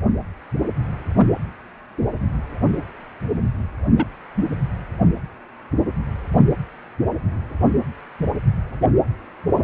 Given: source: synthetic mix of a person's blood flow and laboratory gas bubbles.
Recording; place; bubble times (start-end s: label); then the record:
Doppler ultrasound of blood flow; precordium
3.96-4.07 s: bubbles
4.36-4.45 s: bubbles
From the record:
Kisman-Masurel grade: 112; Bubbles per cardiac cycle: 1 to 2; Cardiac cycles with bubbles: 1 to 10%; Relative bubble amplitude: moderate (0.250 to 0.450); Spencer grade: 1 (occasional bubble signal discernible with the cardiac motion signal, with majority of cardiac periods free of bubbles); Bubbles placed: anywhere in the cardiac cycle